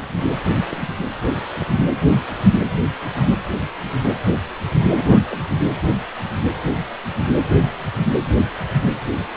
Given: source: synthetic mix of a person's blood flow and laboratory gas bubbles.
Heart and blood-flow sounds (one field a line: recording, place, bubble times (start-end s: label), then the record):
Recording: Doppler ultrasound of blood flow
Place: precordium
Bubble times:
4.95-5.21 s: bubbles
5.30-5.42 s: bubbles
From the record:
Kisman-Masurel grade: 112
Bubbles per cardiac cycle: 1 to 2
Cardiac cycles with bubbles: 1 to 10%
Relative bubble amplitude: moderate (0.250 to 0.450)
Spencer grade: 1 (occasional bubble signal discernible with the cardiac motion signal, with majority of cardiac periods free of bubbles)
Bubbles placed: anywhere in the cardiac cycle